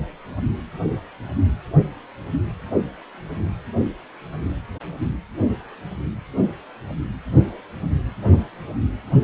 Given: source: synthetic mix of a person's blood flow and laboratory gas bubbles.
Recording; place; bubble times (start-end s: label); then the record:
Doppler ultrasound of blood flow; precordium
no bubbles
From the record:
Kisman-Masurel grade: 000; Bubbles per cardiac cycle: 0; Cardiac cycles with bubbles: 0%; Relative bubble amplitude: no bubbles discernible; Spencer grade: 0 (complete lack of bubble signals)